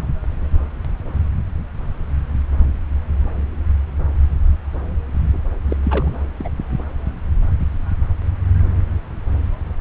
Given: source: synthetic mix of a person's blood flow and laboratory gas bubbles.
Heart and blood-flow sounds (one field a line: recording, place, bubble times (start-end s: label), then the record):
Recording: Doppler ultrasound of blood flow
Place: subclavian vein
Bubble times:
5.70-5.77 s: bubbles
5.83-6.15 s: bubbles
6.38-6.50 s: bubbles
From the record:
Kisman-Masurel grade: 211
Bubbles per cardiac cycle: several, 3 to 8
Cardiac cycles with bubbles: 1 to 10%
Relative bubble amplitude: barely perceptible (0.100 to 0.250)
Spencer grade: 1 (occasional bubble signal discernible with the cardiac motion signal, with majority of cardiac periods free of bubbles)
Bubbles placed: anywhere in the cardiac cycle